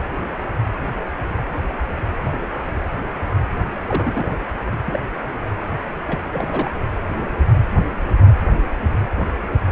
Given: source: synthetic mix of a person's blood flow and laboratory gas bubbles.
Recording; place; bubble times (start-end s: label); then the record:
Doppler ultrasound of blood flow; precordium
3.87-4.30 s: bubbles
4.68-4.76 s: bubbles
4.84-4.99 s: bubbles
6.05-6.19 s: bubbles
6.32-6.71 s: bubbles
From the record:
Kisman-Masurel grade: 221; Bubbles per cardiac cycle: several, 3 to 8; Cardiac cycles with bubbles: 10 to 50%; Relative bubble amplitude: barely perceptible (0.100 to 0.250); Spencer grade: 2 (many but less than half of the cardiac periods contain bubble signals, singularly or in groups); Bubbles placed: anywhere in the cardiac cycle